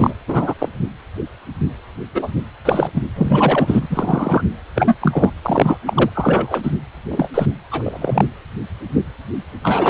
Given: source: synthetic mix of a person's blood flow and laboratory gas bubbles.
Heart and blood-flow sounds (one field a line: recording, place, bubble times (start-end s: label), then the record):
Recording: Doppler ultrasound of blood flow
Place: precordium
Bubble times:
0.00-0.14 s: bubbles
0.28-0.54 s: bubbles
0.59-0.69 s: bubbles
2.15-2.33 s: bubbles
2.65-2.90 s: bubbles
2.93-3.02 s: bubbles
3.17-4.42 s: bubbles
4.76-4.96 s: bubbles
5.01-5.33 s: bubbles
5.43-5.78 s: bubbles
5.86-6.10 s: bubbles
6.15-6.72 s: bubbles
7.08-7.29 s: bubbles
7.34-7.46 s: bubbles
7.71-8.25 s: bubbles
9.62-9.90 s: bubbles
From the record:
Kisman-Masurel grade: 233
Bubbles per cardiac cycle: several, 3 to 8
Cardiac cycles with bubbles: 50 to 99%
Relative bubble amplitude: loud (0.450 to 0.775)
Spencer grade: 3 (all of the cardiac periods contain showers or single bubble signals, but not dominating or overriding the cardiac motion signals)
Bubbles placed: anywhere in the cardiac cycle